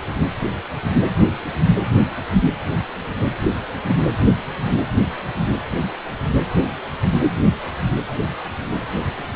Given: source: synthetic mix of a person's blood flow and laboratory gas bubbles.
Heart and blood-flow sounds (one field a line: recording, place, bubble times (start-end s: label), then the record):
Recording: Doppler ultrasound of blood flow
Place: precordium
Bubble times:
9.16-9.23 s: bubbles
9.32-9.36 s: bubbles
From the record:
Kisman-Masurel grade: 111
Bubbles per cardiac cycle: 1 to 2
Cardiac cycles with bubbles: 1 to 10%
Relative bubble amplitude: barely perceptible (0.100 to 0.250)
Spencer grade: 1 (occasional bubble signal discernible with the cardiac motion signal, with majority of cardiac periods free of bubbles)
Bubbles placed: only in the low amplitude regions of the cardiac cycle